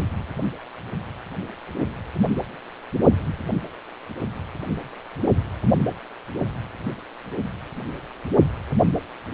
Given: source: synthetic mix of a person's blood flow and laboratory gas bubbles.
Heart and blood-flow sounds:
Doppler ultrasound of blood flow; precordium
no bubbles
From the record:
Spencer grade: 0 (complete lack of bubble signals)

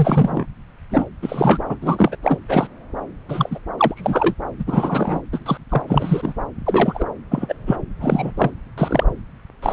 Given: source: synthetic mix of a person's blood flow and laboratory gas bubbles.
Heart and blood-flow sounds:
Doppler ultrasound of blood flow; subclavian vein
0.00-0.45 s: bubbles
0.90-1.05 s: bubbles
1.22-1.64 s: bubbles
1.68-1.76 s: bubbles
1.81-2.16 s: bubbles
2.23-2.38 s: bubbles
2.49-2.67 s: bubbles
3.28-3.58 s: bubbles
3.79-4.34 s: bubbles
4.59-4.64 s: bubbles
4.67-5.20 s: bubbles
5.32-5.39 s: bubbles
5.46-5.57 s: bubbles
5.69-5.82 s: bubbles
5.88-6.33 s: bubbles
6.65-7.05 s: bubbles
7.30-7.54 s: bubbles
7.67-7.76 s: bubbles
8.00-8.32 s: bubbles
8.37-8.51 s: bubbles
8.78-9.04 s: bubbles
9.62-9.73 s: bubbles
From the record:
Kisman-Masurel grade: 243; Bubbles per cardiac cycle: several, 3 to 8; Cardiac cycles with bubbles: 100%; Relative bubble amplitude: loud (0.450 to 0.775); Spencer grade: 3 (all of the cardiac periods contain showers or single bubble signals, but not dominating or overriding the cardiac motion signals); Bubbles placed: anywhere in the cardiac cycle

